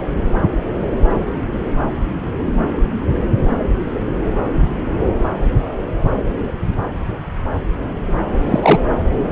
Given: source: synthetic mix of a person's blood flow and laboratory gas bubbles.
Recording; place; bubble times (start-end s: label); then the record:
Doppler ultrasound of blood flow; subclavian vein
8.46-8.60 s: bubbles
8.62-8.79 s: bubbles
From the record:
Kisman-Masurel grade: 213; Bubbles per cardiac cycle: several, 3 to 8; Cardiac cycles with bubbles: 1 to 10%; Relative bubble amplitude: loud (0.450 to 0.775); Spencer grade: 1 (occasional bubble signal discernible with the cardiac motion signal, with majority of cardiac periods free of bubbles); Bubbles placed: anywhere in the cardiac cycle